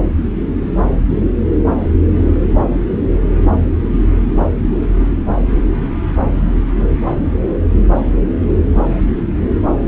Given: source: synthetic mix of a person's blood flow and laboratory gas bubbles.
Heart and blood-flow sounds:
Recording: Doppler ultrasound of blood flow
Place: subclavian vein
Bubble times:
no bubbles
From the record:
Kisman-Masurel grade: 000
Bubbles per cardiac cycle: 0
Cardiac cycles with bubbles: 0%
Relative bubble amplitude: no bubbles discernible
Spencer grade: 0 (complete lack of bubble signals)

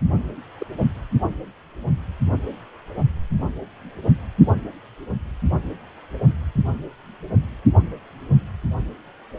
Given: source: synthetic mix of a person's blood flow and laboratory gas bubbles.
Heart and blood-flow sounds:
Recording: Doppler ultrasound of blood flow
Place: precordium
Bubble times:
0.57-0.67 s: bubbles
From the record:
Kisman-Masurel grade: 111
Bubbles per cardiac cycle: 1 to 2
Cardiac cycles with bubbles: 1 to 10%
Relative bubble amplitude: barely perceptible (0.100 to 0.250)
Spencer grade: 1 (occasional bubble signal discernible with the cardiac motion signal, with majority of cardiac periods free of bubbles)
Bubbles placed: only in the low amplitude regions of the cardiac cycle

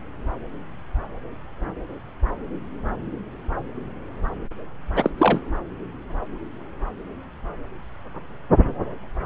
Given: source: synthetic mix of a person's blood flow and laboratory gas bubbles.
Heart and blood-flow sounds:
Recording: Doppler ultrasound of blood flow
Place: subclavian vein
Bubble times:
4.96-5.10 s: bubbles
5.17-5.40 s: bubbles
From the record:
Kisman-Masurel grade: 212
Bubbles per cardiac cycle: several, 3 to 8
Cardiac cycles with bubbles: 1 to 10%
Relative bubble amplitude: moderate (0.250 to 0.450)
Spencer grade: 1 (occasional bubble signal discernible with the cardiac motion signal, with majority of cardiac periods free of bubbles)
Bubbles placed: anywhere in the cardiac cycle

